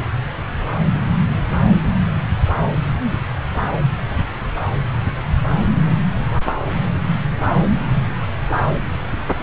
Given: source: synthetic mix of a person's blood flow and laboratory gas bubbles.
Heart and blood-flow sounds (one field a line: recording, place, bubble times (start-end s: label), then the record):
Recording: Doppler ultrasound of blood flow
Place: subclavian vein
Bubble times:
no bubbles
From the record:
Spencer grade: 0 (complete lack of bubble signals)